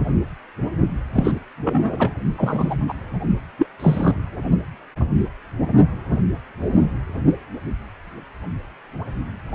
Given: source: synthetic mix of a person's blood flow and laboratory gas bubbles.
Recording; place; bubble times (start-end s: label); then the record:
Doppler ultrasound of blood flow; precordium
1.12-1.40 s: bubbles
1.64-2.15 s: bubbles
2.38-2.75 s: bubbles
2.88-2.94 s: bubbles
3.58-3.67 s: bubbles
3.79-4.14 s: bubbles
From the record:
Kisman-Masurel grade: 223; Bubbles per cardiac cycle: several, 3 to 8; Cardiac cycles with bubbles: 10 to 50%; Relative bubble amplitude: loud (0.450 to 0.775); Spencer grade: 2 (many but less than half of the cardiac periods contain bubble signals, singularly or in groups); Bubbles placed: only in the low amplitude regions of the cardiac cycle